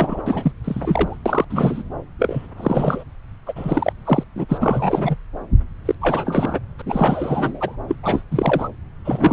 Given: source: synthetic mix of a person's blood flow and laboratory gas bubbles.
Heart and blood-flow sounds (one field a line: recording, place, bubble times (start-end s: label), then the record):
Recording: Doppler ultrasound of blood flow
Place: subclavian vein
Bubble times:
0.00-0.23 s: bubbles
0.26-0.52 s: bubbles
0.64-1.17 s: bubbles
1.25-1.44 s: bubbles
1.50-1.83 s: bubbles
2.19-2.48 s: bubbles
2.57-3.04 s: bubbles
3.46-3.53 s: bubbles
3.55-3.93 s: bubbles
4.05-4.24 s: bubbles
4.35-4.46 s: bubbles
4.49-5.16 s: bubbles
5.85-5.95 s: bubbles
6.01-6.60 s: bubbles
6.79-6.82 s: bubbles
6.86-7.76 s: bubbles
7.88-7.96 s: bubbles
8.03-8.22 s: bubbles
8.30-8.68 s: bubbles
9.04-9.33 s: bubbles
From the record:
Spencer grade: 3 (all of the cardiac periods contain showers or single bubble signals, but not dominating or overriding the cardiac motion signals)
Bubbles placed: anywhere in the cardiac cycle